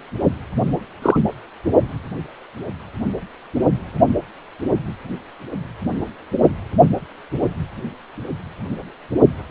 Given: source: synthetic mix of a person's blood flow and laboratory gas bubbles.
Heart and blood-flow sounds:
Doppler ultrasound of blood flow; precordium
1.02-1.17 s: bubbles
From the record:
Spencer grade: 1 (occasional bubble signal discernible with the cardiac motion signal, with majority of cardiac periods free of bubbles); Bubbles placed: only in the low amplitude regions of the cardiac cycle

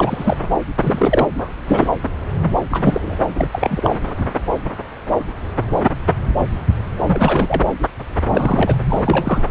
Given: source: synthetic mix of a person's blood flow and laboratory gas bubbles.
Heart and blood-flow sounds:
Doppler ultrasound of blood flow; subclavian vein
0.00-0.37 s: bubbles
0.42-0.49 s: bubbles
0.80-1.28 s: bubbles
1.38-1.49 s: bubbles
1.67-1.89 s: bubbles
2.71-3.17 s: bubbles
3.35-3.48 s: bubbles
3.52-3.95 s: bubbles
7.06-7.62 s: bubbles
8.29-8.76 s: bubbles
8.89-9.51 s: bubbles
From the record:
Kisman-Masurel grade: 332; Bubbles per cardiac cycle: rolling drumbeat, 9 or more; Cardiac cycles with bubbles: 50 to 99%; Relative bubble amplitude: moderate (0.250 to 0.450); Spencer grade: 3 (all of the cardiac periods contain showers or single bubble signals, but not dominating or overriding the cardiac motion signals); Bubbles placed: anywhere in the cardiac cycle

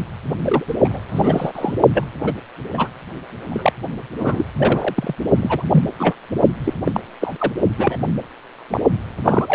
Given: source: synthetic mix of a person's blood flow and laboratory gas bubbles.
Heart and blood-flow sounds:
Doppler ultrasound of blood flow; precordium
0.45-0.64 s: bubbles
0.67-0.74 s: bubbles
0.84-1.00 s: bubbles
1.09-1.75 s: bubbles
1.93-2.04 s: bubbles
2.23-2.33 s: bubbles
2.74-2.89 s: bubbles
3.49-3.73 s: bubbles
4.19-4.45 s: bubbles
4.57-5.15 s: bubbles
5.41-5.62 s: bubbles
5.71-5.83 s: bubbles
5.99-6.12 s: bubbles
6.64-6.74 s: bubbles
6.84-7.00 s: bubbles
7.21-7.33 s: bubbles
7.38-7.52 s: bubbles
7.78-7.96 s: bubbles
8.69-8.80 s: bubbles
9.24-9.55 s: bubbles
From the record:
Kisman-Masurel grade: 242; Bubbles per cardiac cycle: several, 3 to 8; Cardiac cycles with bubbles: 100%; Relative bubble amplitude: moderate (0.250 to 0.450); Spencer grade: 3 (all of the cardiac periods contain showers or single bubble signals, but not dominating or overriding the cardiac motion signals); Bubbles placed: only in the low amplitude regions of the cardiac cycle

